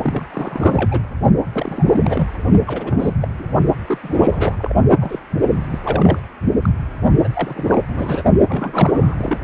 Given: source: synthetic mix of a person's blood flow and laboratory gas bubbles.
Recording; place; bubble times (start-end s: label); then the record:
Doppler ultrasound of blood flow; precordium
0.02-0.26 s: bubbles
0.32-0.99 s: bubbles
1.54-2.31 s: bubbles
2.66-3.14 s: bubbles
3.22-3.28 s: bubbles
3.39-3.44 s: bubbles
3.88-3.99 s: bubbles
4.03-4.73 s: bubbles
5.01-5.20 s: bubbles
5.48-5.61 s: bubbles
5.70-5.79 s: bubbles
5.83-6.20 s: bubbles
6.62-6.70 s: bubbles
7.24-7.29 s: bubbles
7.34-7.83 s: bubbles
7.89-8.23 s: bubbles
8.48-9.16 s: bubbles
9.18-9.36 s: bubbles
From the record:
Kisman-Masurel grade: 342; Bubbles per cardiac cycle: rolling drumbeat, 9 or more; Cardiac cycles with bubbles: 100%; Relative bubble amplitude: moderate (0.250 to 0.450); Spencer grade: 3 (all of the cardiac periods contain showers or single bubble signals, but not dominating or overriding the cardiac motion signals); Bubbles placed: only in the low amplitude regions of the cardiac cycle